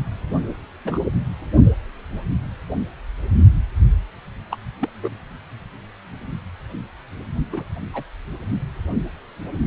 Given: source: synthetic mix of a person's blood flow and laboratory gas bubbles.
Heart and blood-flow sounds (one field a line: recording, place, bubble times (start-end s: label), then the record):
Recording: Doppler ultrasound of blood flow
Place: precordium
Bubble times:
0.85-0.98 s: bubbles
4.50-4.58 s: bubbles
4.79-4.89 s: bubbles
5.02-5.16 s: bubbles
7.52-7.63 s: bubbles
7.94-8.03 s: bubbles
From the record:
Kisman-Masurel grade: 121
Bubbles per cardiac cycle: 1 to 2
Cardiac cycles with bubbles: 10 to 50%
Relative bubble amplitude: barely perceptible (0.100 to 0.250)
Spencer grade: 2 (many but less than half of the cardiac periods contain bubble signals, singularly or in groups)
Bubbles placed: only in the low amplitude regions of the cardiac cycle